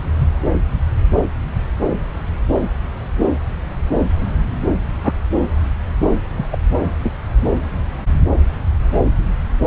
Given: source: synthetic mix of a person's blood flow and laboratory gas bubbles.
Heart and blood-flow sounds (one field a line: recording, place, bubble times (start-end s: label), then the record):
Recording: Doppler ultrasound of blood flow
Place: subclavian vein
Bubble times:
0.19-0.29 s: bubbles
5.03-5.13 s: bubbles
6.37-6.46 s: bubbles
6.52-6.58 s: bubbles
7.03-7.14 s: bubbles
From the record:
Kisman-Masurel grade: 122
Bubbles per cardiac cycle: 1 to 2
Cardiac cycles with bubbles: 10 to 50%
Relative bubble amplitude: moderate (0.250 to 0.450)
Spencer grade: 2 (many but less than half of the cardiac periods contain bubble signals, singularly or in groups)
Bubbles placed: anywhere in the cardiac cycle